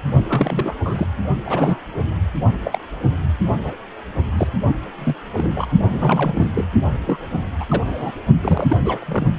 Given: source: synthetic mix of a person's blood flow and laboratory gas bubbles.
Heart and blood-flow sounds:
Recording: Doppler ultrasound of blood flow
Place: precordium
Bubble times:
0.22-0.76 s: bubbles
0.85-1.06 s: bubbles
1.45-1.79 s: bubbles
2.64-2.79 s: bubbles
3.64-3.73 s: bubbles
4.37-4.47 s: bubbles
4.98-5.16 s: bubbles
5.32-5.67 s: bubbles
5.92-6.51 s: bubbles
6.55-6.64 s: bubbles
7.07-7.18 s: bubbles
7.60-7.82 s: bubbles
7.86-8.12 s: bubbles
8.41-8.67 s: bubbles
8.70-8.77 s: bubbles
8.85-9.36 s: bubbles
From the record:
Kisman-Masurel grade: 242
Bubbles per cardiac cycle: several, 3 to 8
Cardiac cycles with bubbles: 100%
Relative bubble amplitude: moderate (0.250 to 0.450)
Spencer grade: 3 (all of the cardiac periods contain showers or single bubble signals, but not dominating or overriding the cardiac motion signals)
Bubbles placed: only in the low amplitude regions of the cardiac cycle

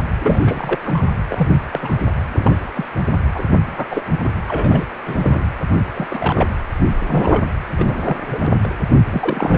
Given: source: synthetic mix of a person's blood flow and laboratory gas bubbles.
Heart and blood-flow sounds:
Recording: Doppler ultrasound of blood flow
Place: precordium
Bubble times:
0.20-0.78 s: bubbles
0.82-1.02 s: bubbles
1.29-1.59 s: bubbles
1.71-1.96 s: bubbles
2.33-2.70 s: bubbles
2.75-2.85 s: bubbles
3.34-3.43 s: bubbles
3.65-3.87 s: bubbles
3.90-4.02 s: bubbles
4.12-4.17 s: bubbles
4.24-4.35 s: bubbles
4.48-4.86 s: bubbles
5.06-5.44 s: bubbles
5.95-6.56 s: bubbles
7.08-7.50 s: bubbles
7.78-8.16 s: bubbles
8.20-8.71 s: bubbles
9.06-9.57 s: bubbles
From the record:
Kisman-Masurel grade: 242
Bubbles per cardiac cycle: several, 3 to 8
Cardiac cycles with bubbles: 100%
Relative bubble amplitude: moderate (0.250 to 0.450)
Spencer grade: 3 (all of the cardiac periods contain showers or single bubble signals, but not dominating or overriding the cardiac motion signals)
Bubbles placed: anywhere in the cardiac cycle

